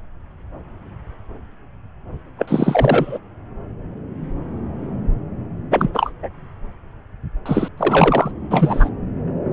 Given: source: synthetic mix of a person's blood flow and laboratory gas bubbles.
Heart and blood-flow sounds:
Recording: Doppler ultrasound of blood flow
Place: subclavian vein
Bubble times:
2.38-3.19 s: bubbles
5.71-5.91 s: bubbles
5.94-6.12 s: bubbles
6.23-6.29 s: bubbles
7.46-7.69 s: bubbles
7.77-8.31 s: bubbles
8.51-8.89 s: bubbles
From the record:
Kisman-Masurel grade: 223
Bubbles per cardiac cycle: several, 3 to 8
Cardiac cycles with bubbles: 10 to 50%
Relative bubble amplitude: loud (0.450 to 0.775)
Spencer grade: 2 (many but less than half of the cardiac periods contain bubble signals, singularly or in groups)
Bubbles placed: anywhere in the cardiac cycle

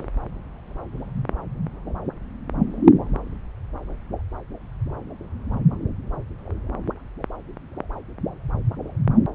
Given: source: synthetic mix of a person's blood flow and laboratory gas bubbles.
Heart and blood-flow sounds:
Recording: Doppler ultrasound of blood flow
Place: subclavian vein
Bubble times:
0.00-0.04 s: bubbles
From the record:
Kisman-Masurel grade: 213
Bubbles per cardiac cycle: several, 3 to 8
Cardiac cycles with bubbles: 1 to 10%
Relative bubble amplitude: loud (0.450 to 0.775)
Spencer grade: 1 (occasional bubble signal discernible with the cardiac motion signal, with majority of cardiac periods free of bubbles)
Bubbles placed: anywhere in the cardiac cycle

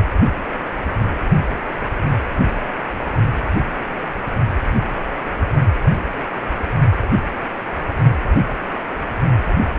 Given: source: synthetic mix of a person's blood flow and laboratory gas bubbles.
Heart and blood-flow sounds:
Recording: Doppler ultrasound of blood flow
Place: precordium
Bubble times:
no bubbles
From the record:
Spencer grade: 0 (complete lack of bubble signals)

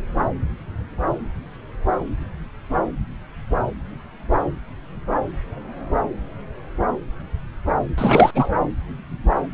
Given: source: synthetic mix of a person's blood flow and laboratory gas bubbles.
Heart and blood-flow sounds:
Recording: Doppler ultrasound of blood flow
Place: subclavian vein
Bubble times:
7.97-8.31 s: bubbles
8.35-8.51 s: bubbles
From the record:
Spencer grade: 2 (many but less than half of the cardiac periods contain bubble signals, singularly or in groups)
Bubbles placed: anywhere in the cardiac cycle

